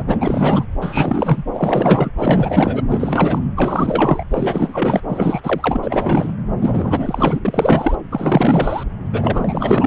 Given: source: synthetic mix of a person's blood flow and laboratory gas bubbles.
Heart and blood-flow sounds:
Doppler ultrasound of blood flow; subclavian vein
0.00-0.03 s: bubbles
0.07-0.65 s: bubbles
0.80-1.43 s: bubbles
1.53-2.10 s: bubbles
2.17-2.81 s: bubbles
2.88-3.42 s: bubbles
3.56-4.25 s: bubbles
4.31-5.03 s: bubbles
5.08-5.41 s: bubbles
5.43-6.33 s: bubbles
6.60-7.39 s: bubbles
7.45-7.96 s: bubbles
8.11-8.84 s: bubbles
9.12-9.86 s: bubbles
From the record:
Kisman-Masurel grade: 444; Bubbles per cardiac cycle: continuous sound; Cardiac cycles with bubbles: 100%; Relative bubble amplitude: maximal (0.775 to 0.999); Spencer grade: 4 (maximum detectable bubble signal sounding continuously throughout systole and diastole of every cardiac period, and overriding the amplitude of the normal cardiac signals); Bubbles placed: anywhere in the cardiac cycle

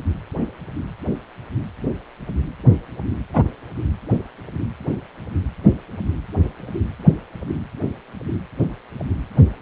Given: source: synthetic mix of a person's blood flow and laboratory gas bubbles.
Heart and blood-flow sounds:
Doppler ultrasound of blood flow; precordium
3.33-3.43 s: bubbles
From the record:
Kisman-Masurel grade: 112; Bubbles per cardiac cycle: 1 to 2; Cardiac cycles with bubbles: 1 to 10%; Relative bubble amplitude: moderate (0.250 to 0.450); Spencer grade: 1 (occasional bubble signal discernible with the cardiac motion signal, with majority of cardiac periods free of bubbles); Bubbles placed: anywhere in the cardiac cycle

